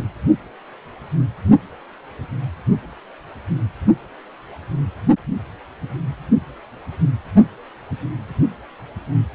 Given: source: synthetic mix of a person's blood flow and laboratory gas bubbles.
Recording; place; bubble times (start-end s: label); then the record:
Doppler ultrasound of blood flow; precordium
no bubbles
From the record:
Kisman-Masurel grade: 000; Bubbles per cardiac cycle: 0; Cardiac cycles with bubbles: 0%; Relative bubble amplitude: no bubbles discernible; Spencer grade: 0 (complete lack of bubble signals)